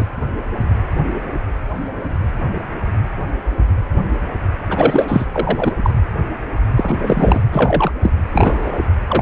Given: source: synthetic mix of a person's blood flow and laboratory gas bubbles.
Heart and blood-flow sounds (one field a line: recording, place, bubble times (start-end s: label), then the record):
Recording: Doppler ultrasound of blood flow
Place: precordium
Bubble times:
0.00-0.06 s: bubbles
4.69-5.26 s: bubbles
5.32-5.73 s: bubbles
5.83-5.90 s: bubbles
6.76-7.42 s: bubbles
7.51-7.92 s: bubbles
8.02-8.11 s: bubbles
8.33-8.73 s: bubbles
9.08-9.22 s: bubbles
From the record:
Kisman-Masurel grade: 223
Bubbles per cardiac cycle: several, 3 to 8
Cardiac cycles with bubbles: 10 to 50%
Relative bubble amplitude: loud (0.450 to 0.775)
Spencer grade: 2 (many but less than half of the cardiac periods contain bubble signals, singularly or in groups)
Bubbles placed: anywhere in the cardiac cycle